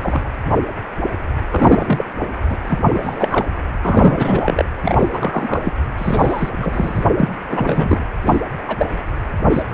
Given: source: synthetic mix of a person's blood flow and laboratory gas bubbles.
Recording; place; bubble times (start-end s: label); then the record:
Doppler ultrasound of blood flow; precordium
0.03-0.21 s: bubbles
1.50-2.05 s: bubbles
2.49-2.58 s: bubbles
2.67-3.45 s: bubbles
3.83-4.63 s: bubbles
4.82-5.72 s: bubbles
5.97-6.50 s: bubbles
6.56-7.04 s: bubbles
7.17-7.29 s: bubbles
7.51-8.04 s: bubbles
8.26-8.41 s: bubbles
8.68-8.86 s: bubbles
9.50-9.62 s: bubbles
9.71-9.74 s: bubbles
From the record:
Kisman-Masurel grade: 233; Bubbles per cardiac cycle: several, 3 to 8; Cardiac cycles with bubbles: 50 to 99%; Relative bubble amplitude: loud (0.450 to 0.775); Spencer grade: 3 (all of the cardiac periods contain showers or single bubble signals, but not dominating or overriding the cardiac motion signals); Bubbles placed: anywhere in the cardiac cycle